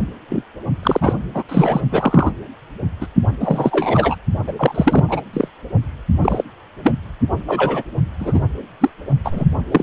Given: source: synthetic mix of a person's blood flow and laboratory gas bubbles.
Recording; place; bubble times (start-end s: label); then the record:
Doppler ultrasound of blood flow; precordium
0.00-0.06 s: bubbles
0.29-0.43 s: bubbles
0.83-1.13 s: bubbles
1.34-1.44 s: bubbles
1.48-1.81 s: bubbles
1.90-2.31 s: bubbles
3.01-3.07 s: bubbles
3.40-4.16 s: bubbles
4.47-4.52 s: bubbles
4.57-5.05 s: bubbles
5.08-5.21 s: bubbles
5.33-5.48 s: bubbles
6.22-6.43 s: bubbles
6.83-6.94 s: bubbles
7.46-7.83 s: bubbles
8.20-8.43 s: bubbles
8.80-8.90 s: bubbles
9.25-9.45 s: bubbles
9.72-9.83 s: bubbles
From the record:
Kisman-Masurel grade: 243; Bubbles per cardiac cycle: several, 3 to 8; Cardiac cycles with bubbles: 100%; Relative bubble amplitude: loud (0.450 to 0.775); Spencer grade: 3 (all of the cardiac periods contain showers or single bubble signals, but not dominating or overriding the cardiac motion signals); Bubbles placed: only in the low amplitude regions of the cardiac cycle